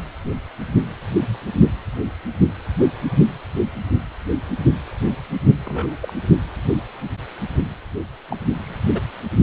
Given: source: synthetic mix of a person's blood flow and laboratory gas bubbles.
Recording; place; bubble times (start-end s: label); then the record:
Doppler ultrasound of blood flow; precordium
5.33-5.39 s: bubbles
5.66-5.97 s: bubbles
6.02-6.13 s: bubbles
8.31-8.37 s: bubbles
8.64-9.00 s: bubbles
From the record:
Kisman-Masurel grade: 121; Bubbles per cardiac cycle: 1 to 2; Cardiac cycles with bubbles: 10 to 50%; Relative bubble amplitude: barely perceptible (0.100 to 0.250); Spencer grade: 2 (many but less than half of the cardiac periods contain bubble signals, singularly or in groups); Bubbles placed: only in the low amplitude regions of the cardiac cycle